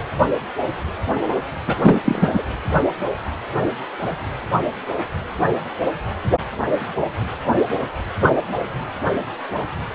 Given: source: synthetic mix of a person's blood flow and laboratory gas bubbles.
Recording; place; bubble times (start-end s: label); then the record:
Doppler ultrasound of blood flow; precordium
1.67-1.75 s: bubbles
1.81-2.01 s: bubbles
2.04-2.42 s: bubbles
From the record:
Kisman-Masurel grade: 213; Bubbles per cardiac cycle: several, 3 to 8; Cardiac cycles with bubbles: 1 to 10%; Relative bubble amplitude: loud (0.450 to 0.775); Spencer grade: 1 (occasional bubble signal discernible with the cardiac motion signal, with majority of cardiac periods free of bubbles); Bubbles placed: only in the low amplitude regions of the cardiac cycle